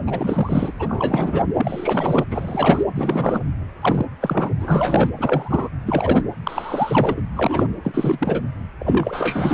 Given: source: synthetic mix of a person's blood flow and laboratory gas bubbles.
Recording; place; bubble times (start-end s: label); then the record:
Doppler ultrasound of blood flow; precordium
0.06-0.72 s: bubbles
0.79-1.42 s: bubbles
1.56-2.24 s: bubbles
2.30-2.83 s: bubbles
2.95-3.40 s: bubbles
3.81-4.07 s: bubbles
4.21-4.50 s: bubbles
4.59-5.10 s: bubbles
5.18-5.70 s: bubbles
5.86-6.23 s: bubbles
6.43-7.22 s: bubbles
7.33-7.67 s: bubbles
7.83-8.42 s: bubbles
8.79-9.54 s: bubbles
From the record:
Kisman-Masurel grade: 343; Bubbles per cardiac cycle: rolling drumbeat, 9 or more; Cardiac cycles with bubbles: 100%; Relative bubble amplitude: loud (0.450 to 0.775); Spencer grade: 3 (all of the cardiac periods contain showers or single bubble signals, but not dominating or overriding the cardiac motion signals); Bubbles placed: anywhere in the cardiac cycle